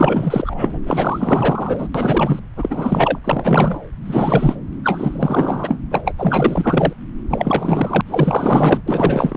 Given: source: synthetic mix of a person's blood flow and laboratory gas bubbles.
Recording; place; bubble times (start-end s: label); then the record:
Doppler ultrasound of blood flow; subclavian vein
0.00-0.80 s: bubbles
0.86-1.88 s: bubbles
1.94-2.40 s: bubbles
2.56-3.19 s: bubbles
3.24-3.80 s: bubbles
4.06-4.56 s: bubbles
4.83-5.78 s: bubbles
5.91-6.02 s: bubbles
6.05-6.14 s: bubbles
6.18-6.93 s: bubbles
7.29-8.01 s: bubbles
8.06-8.80 s: bubbles
8.88-9.37 s: bubbles
From the record:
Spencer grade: 4 (maximum detectable bubble signal sounding continuously throughout systole and diastole of every cardiac period, and overriding the amplitude of the normal cardiac signals); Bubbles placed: anywhere in the cardiac cycle